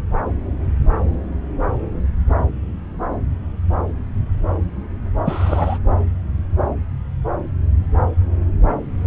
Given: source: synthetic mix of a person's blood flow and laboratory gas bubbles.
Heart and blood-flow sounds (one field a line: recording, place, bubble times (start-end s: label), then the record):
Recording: Doppler ultrasound of blood flow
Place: subclavian vein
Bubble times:
5.25-5.79 s: bubbles
From the record:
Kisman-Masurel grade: 212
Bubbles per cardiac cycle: several, 3 to 8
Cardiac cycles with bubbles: 1 to 10%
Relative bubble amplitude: moderate (0.250 to 0.450)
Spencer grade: 1 (occasional bubble signal discernible with the cardiac motion signal, with majority of cardiac periods free of bubbles)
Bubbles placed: anywhere in the cardiac cycle